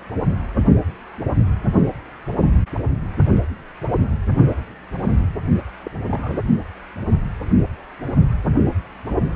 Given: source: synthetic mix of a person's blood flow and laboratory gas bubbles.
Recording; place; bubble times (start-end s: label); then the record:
Doppler ultrasound of blood flow; precordium
5.84-5.89 s: bubbles
6.11-6.40 s: bubbles
From the record:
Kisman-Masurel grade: 221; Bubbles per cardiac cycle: several, 3 to 8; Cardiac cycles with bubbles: 10 to 50%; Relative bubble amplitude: barely perceptible (0.100 to 0.250); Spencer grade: 2 (many but less than half of the cardiac periods contain bubble signals, singularly or in groups); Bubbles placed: only in the low amplitude regions of the cardiac cycle